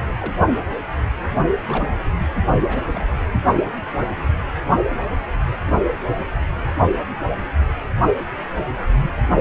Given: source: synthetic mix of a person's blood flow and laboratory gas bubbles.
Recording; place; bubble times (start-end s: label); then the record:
Doppler ultrasound of blood flow; precordium
0.09-0.12 s: bubbles
0.20-0.39 s: bubbles
1.66-1.88 s: bubbles
2.67-3.31 s: bubbles
From the record:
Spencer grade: 2 (many but less than half of the cardiac periods contain bubble signals, singularly or in groups); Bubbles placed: only in the low amplitude regions of the cardiac cycle